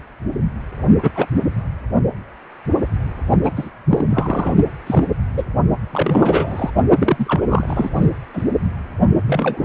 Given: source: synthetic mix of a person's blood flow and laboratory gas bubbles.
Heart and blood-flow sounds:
Doppler ultrasound of blood flow; precordium
1.02-1.10 s: bubbles
1.15-1.26 s: bubbles
3.42-3.52 s: bubbles
3.56-3.69 s: bubbles
3.89-4.05 s: bubbles
4.09-4.54 s: bubbles
4.87-5.05 s: bubbles
5.34-5.44 s: bubbles
5.92-6.71 s: bubbles
6.96-7.41 s: bubbles
7.48-7.90 s: bubbles
7.95-8.09 s: bubbles
8.34-8.44 s: bubbles
9.26-9.65 s: bubbles
From the record:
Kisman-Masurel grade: 232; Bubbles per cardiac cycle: several, 3 to 8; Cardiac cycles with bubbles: 50 to 99%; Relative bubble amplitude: moderate (0.250 to 0.450); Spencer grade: 3 (all of the cardiac periods contain showers or single bubble signals, but not dominating or overriding the cardiac motion signals); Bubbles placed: only in the low amplitude regions of the cardiac cycle

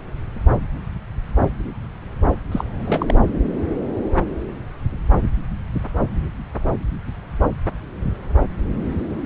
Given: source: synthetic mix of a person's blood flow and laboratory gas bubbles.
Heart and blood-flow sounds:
Doppler ultrasound of blood flow; subclavian vein
2.52-2.65 s: bubbles
2.85-3.14 s: bubbles
From the record:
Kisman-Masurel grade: 212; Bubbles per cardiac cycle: several, 3 to 8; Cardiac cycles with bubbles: 1 to 10%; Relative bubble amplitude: moderate (0.250 to 0.450); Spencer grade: 1 (occasional bubble signal discernible with the cardiac motion signal, with majority of cardiac periods free of bubbles); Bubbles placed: anywhere in the cardiac cycle

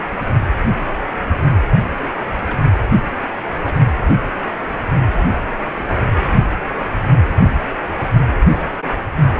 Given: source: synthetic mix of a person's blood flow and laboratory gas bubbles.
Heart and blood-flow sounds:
Doppler ultrasound of blood flow; precordium
2.48-2.58 s: bubbles
3.63-3.81 s: bubbles
5.78-5.83 s: bubbles
7.50-7.55 s: bubbles
From the record:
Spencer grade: 2 (many but less than half of the cardiac periods contain bubble signals, singularly or in groups); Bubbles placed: anywhere in the cardiac cycle

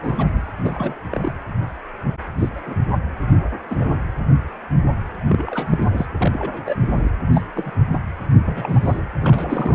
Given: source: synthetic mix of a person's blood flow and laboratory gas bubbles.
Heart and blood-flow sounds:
Doppler ultrasound of blood flow; precordium
0.00-0.49 s: bubbles
0.62-0.94 s: bubbles
1.10-1.33 s: bubbles
2.38-2.49 s: bubbles
2.55-2.60 s: bubbles
2.65-2.75 s: bubbles
3.62-3.90 s: bubbles
5.28-6.06 s: bubbles
6.18-6.77 s: bubbles
6.79-7.11 s: bubbles
7.33-7.42 s: bubbles
7.54-7.77 s: bubbles
7.92-8.00 s: bubbles
8.34-8.39 s: bubbles
8.45-8.99 s: bubbles
9.19-9.75 s: bubbles
From the record:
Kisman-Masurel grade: 232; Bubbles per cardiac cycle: several, 3 to 8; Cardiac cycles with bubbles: 50 to 99%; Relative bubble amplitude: moderate (0.250 to 0.450); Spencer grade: 3 (all of the cardiac periods contain showers or single bubble signals, but not dominating or overriding the cardiac motion signals); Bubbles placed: anywhere in the cardiac cycle

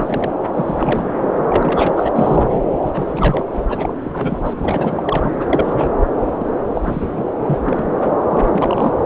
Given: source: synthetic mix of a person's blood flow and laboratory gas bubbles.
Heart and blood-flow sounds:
Doppler ultrasound of blood flow; subclavian vein
0.00-0.31 s: bubbles
0.53-1.10 s: bubbles
1.35-2.11 s: bubbles
2.16-2.80 s: bubbles
2.86-3.45 s: bubbles
3.69-3.94 s: bubbles
4.05-4.41 s: bubbles
4.45-4.54 s: bubbles
4.58-5.30 s: bubbles
5.36-5.89 s: bubbles
6.39-6.46 s: bubbles
6.74-7.25 s: bubbles
7.46-7.60 s: bubbles
7.66-7.86 s: bubbles
7.90-8.16 s: bubbles
8.29-8.92 s: bubbles
9.02-9.06 s: bubbles
From the record:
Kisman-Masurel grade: 342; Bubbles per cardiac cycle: rolling drumbeat, 9 or more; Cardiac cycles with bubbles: 100%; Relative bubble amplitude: moderate (0.250 to 0.450); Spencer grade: 3 (all of the cardiac periods contain showers or single bubble signals, but not dominating or overriding the cardiac motion signals); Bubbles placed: anywhere in the cardiac cycle

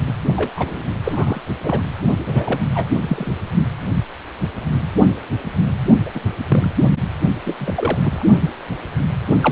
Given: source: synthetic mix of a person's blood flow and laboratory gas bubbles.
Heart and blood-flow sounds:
Doppler ultrasound of blood flow; precordium
0.06-0.13 s: bubbles
0.36-0.82 s: bubbles
1.03-1.41 s: bubbles
1.60-1.90 s: bubbles
2.26-2.60 s: bubbles
2.74-2.86 s: bubbles
3.01-3.32 s: bubbles
6.06-6.10 s: bubbles
6.14-6.20 s: bubbles
6.48-6.71 s: bubbles
7.46-7.54 s: bubbles
7.58-8.24 s: bubbles
9.40-9.52 s: bubbles
From the record:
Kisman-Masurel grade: 232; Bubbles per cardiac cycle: several, 3 to 8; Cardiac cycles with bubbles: 50 to 99%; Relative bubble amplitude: moderate (0.250 to 0.450); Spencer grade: 3 (all of the cardiac periods contain showers or single bubble signals, but not dominating or overriding the cardiac motion signals); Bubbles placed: only in the low amplitude regions of the cardiac cycle

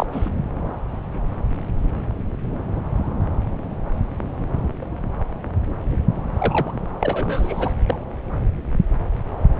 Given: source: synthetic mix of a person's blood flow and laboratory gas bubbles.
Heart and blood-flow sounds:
Doppler ultrasound of blood flow; subclavian vein
0.00-0.06 s: bubbles
0.12-0.29 s: bubbles
6.33-6.72 s: bubbles
7.00-7.74 s: bubbles
7.85-7.99 s: bubbles
From the record:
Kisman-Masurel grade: 222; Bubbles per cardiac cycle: several, 3 to 8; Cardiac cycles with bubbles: 10 to 50%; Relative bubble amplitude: moderate (0.250 to 0.450); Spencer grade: 2 (many but less than half of the cardiac periods contain bubble signals, singularly or in groups); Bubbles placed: anywhere in the cardiac cycle

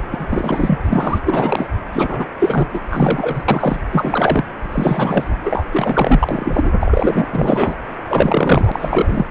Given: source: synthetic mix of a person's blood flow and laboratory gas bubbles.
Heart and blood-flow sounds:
Doppler ultrasound of blood flow; precordium
0.00-0.02 s: bubbles
0.11-0.78 s: bubbles
0.85-1.21 s: bubbles
1.25-1.69 s: bubbles
1.92-2.27 s: bubbles
2.39-2.68 s: bubbles
2.73-2.80 s: bubbles
2.90-3.44 s: bubbles
3.48-3.80 s: bubbles
3.92-4.45 s: bubbles
4.72-5.25 s: bubbles
5.43-5.65 s: bubbles
5.71-6.72 s: bubbles
6.80-7.28 s: bubbles
7.32-7.76 s: bubbles
8.10-9.31 s: bubbles
From the record:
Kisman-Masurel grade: 343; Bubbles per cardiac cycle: rolling drumbeat, 9 or more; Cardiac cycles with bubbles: 100%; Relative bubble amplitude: loud (0.450 to 0.775); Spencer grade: 3 (all of the cardiac periods contain showers or single bubble signals, but not dominating or overriding the cardiac motion signals); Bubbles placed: anywhere in the cardiac cycle

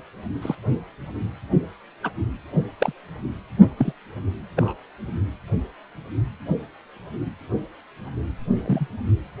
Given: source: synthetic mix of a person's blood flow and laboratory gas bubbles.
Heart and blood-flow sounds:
Doppler ultrasound of blood flow; precordium
0.41-0.55 s: bubbles
2.03-2.10 s: bubbles
2.79-2.93 s: bubbles
3.77-3.92 s: bubbles
4.56-4.73 s: bubbles
8.65-8.87 s: bubbles
From the record:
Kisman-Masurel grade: 122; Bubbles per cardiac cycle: 1 to 2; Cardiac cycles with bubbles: 10 to 50%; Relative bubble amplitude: moderate (0.250 to 0.450); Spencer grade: 2 (many but less than half of the cardiac periods contain bubble signals, singularly or in groups); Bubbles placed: anywhere in the cardiac cycle

